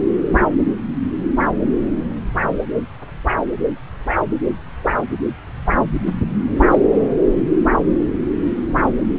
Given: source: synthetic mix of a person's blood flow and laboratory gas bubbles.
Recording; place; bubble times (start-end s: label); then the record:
Doppler ultrasound of blood flow; subclavian vein
6.70-6.79 s: bubbles
From the record:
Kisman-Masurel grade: 123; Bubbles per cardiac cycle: 1 to 2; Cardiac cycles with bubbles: 10 to 50%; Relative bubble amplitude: loud (0.450 to 0.775); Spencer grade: 2 (many but less than half of the cardiac periods contain bubble signals, singularly or in groups); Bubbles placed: anywhere in the cardiac cycle